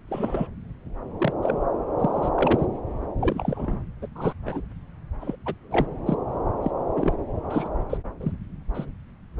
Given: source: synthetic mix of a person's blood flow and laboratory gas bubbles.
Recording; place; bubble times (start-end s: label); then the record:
Doppler ultrasound of blood flow; subclavian vein
0.08-0.48 s: bubbles
1.20-1.32 s: bubbles
1.42-1.58 s: bubbles
1.98-2.29 s: bubbles
2.34-2.66 s: bubbles
3.21-3.80 s: bubbles
4.02-4.08 s: bubbles
4.16-4.33 s: bubbles
4.46-4.61 s: bubbles
5.21-5.36 s: bubbles
5.46-5.55 s: bubbles
5.71-5.86 s: bubbles
6.06-6.15 s: bubbles
6.62-6.71 s: bubbles
6.96-7.13 s: bubbles
7.50-7.69 s: bubbles
7.90-7.98 s: bubbles
8.20-8.32 s: bubbles
8.74-8.85 s: bubbles
From the record:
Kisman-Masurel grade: 242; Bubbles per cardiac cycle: several, 3 to 8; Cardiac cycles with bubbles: 100%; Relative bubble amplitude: moderate (0.250 to 0.450); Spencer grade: 3 (all of the cardiac periods contain showers or single bubble signals, but not dominating or overriding the cardiac motion signals); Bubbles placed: anywhere in the cardiac cycle